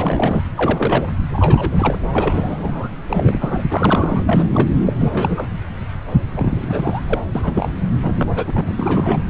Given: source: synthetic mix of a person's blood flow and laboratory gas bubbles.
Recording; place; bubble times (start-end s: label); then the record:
Doppler ultrasound of blood flow; subclavian vein
0.00-0.45 s: bubbles
0.56-1.11 s: bubbles
1.31-1.99 s: bubbles
2.12-2.90 s: bubbles
3.09-3.64 s: bubbles
3.70-4.20 s: bubbles
4.26-4.69 s: bubbles
4.86-4.92 s: bubbles
5.00-5.47 s: bubbles
6.34-7.02 s: bubbles
7.08-7.22 s: bubbles
7.34-7.72 s: bubbles
8.03-8.30 s: bubbles
8.35-8.72 s: bubbles
8.77-9.23 s: bubbles
From the record:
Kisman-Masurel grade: 332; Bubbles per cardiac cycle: rolling drumbeat, 9 or more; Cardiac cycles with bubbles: 50 to 99%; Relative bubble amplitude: moderate (0.250 to 0.450); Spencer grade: 3 (all of the cardiac periods contain showers or single bubble signals, but not dominating or overriding the cardiac motion signals); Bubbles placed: anywhere in the cardiac cycle